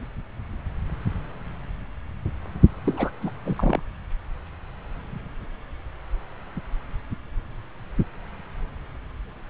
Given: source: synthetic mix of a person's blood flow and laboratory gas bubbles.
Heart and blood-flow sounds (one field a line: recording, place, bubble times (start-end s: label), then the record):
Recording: Doppler ultrasound of blood flow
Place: subclavian vein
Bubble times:
2.85-3.10 s: bubbles
3.22-3.31 s: bubbles
3.45-3.82 s: bubbles
From the record:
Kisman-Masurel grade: 212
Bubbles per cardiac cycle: several, 3 to 8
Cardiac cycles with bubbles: 1 to 10%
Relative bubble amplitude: moderate (0.250 to 0.450)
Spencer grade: 1 (occasional bubble signal discernible with the cardiac motion signal, with majority of cardiac periods free of bubbles)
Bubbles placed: anywhere in the cardiac cycle